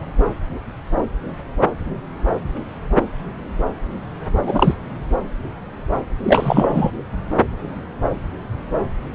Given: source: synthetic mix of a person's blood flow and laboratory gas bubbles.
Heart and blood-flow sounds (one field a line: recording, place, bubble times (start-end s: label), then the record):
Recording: Doppler ultrasound of blood flow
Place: subclavian vein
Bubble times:
4.46-4.74 s: bubbles
6.23-6.91 s: bubbles
From the record:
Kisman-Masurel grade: 223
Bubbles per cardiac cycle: several, 3 to 8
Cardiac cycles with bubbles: 10 to 50%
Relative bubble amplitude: loud (0.450 to 0.775)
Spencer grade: 2 (many but less than half of the cardiac periods contain bubble signals, singularly or in groups)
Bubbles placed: anywhere in the cardiac cycle